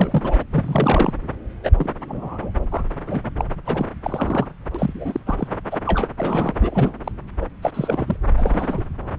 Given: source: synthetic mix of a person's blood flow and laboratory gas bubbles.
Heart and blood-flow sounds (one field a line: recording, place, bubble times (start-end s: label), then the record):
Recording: Doppler ultrasound of blood flow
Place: subclavian vein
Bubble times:
0.00-0.44 s: bubbles
0.51-1.13 s: bubbles
1.63-1.71 s: bubbles
1.76-1.90 s: bubbles
2.08-2.51 s: bubbles
2.71-2.84 s: bubbles
3.07-3.21 s: bubbles
3.37-3.45 s: bubbles
3.66-3.86 s: bubbles
4.02-4.46 s: bubbles
4.75-5.20 s: bubbles
5.25-5.47 s: bubbles
5.70-5.78 s: bubbles
5.86-6.08 s: bubbles
6.17-6.53 s: bubbles
6.60-6.95 s: bubbles
7.04-7.12 s: bubbles
7.42-7.46 s: bubbles
7.62-7.71 s: bubbles
7.74-8.16 s: bubbles
8.37-8.82 s: bubbles
From the record:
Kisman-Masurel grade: 232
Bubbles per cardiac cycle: several, 3 to 8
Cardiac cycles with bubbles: 50 to 99%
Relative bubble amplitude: moderate (0.250 to 0.450)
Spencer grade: 3 (all of the cardiac periods contain showers or single bubble signals, but not dominating or overriding the cardiac motion signals)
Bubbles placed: anywhere in the cardiac cycle